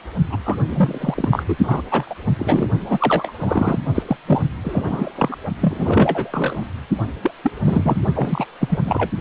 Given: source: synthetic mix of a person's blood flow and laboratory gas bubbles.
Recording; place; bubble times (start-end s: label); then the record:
Doppler ultrasound of blood flow; precordium
0.29-0.37 s: bubbles
0.45-0.56 s: bubbles
0.68-1.43 s: bubbles
1.48-1.56 s: bubbles
1.62-1.82 s: bubbles
1.90-2.15 s: bubbles
2.38-2.68 s: bubbles
2.80-3.32 s: bubbles
3.38-3.79 s: bubbles
3.95-4.03 s: bubbles
4.07-4.17 s: bubbles
4.27-4.42 s: bubbles
4.63-5.12 s: bubbles
5.15-5.36 s: bubbles
5.62-6.63 s: bubbles
7.21-7.31 s: bubbles
7.43-7.51 s: bubbles
7.63-7.98 s: bubbles
8.15-8.45 s: bubbles
8.60-8.79 s: bubbles
8.85-9.11 s: bubbles
From the record:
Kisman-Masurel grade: 342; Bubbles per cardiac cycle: rolling drumbeat, 9 or more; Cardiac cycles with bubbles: 100%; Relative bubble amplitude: moderate (0.250 to 0.450); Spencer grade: 3 (all of the cardiac periods contain showers or single bubble signals, but not dominating or overriding the cardiac motion signals); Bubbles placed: only in the low amplitude regions of the cardiac cycle